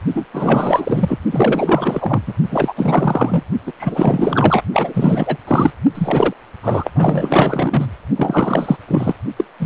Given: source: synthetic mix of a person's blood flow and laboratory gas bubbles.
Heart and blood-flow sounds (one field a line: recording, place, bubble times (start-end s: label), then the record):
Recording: Doppler ultrasound of blood flow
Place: precordium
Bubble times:
0.14-0.27 s: bubbles
0.32-1.19 s: bubbles
1.31-2.21 s: bubbles
2.27-2.33 s: bubbles
2.51-2.73 s: bubbles
2.77-3.42 s: bubbles
3.67-3.72 s: bubbles
3.77-4.62 s: bubbles
4.73-5.37 s: bubbles
5.47-5.72 s: bubbles
5.95-6.34 s: bubbles
6.62-6.91 s: bubbles
6.95-7.87 s: bubbles
8.16-8.77 s: bubbles
8.88-9.14 s: bubbles
9.37-9.45 s: bubbles
9.60-9.66 s: bubbles
From the record:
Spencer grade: 4 (maximum detectable bubble signal sounding continuously throughout systole and diastole of every cardiac period, and overriding the amplitude of the normal cardiac signals)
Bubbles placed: only in the low amplitude regions of the cardiac cycle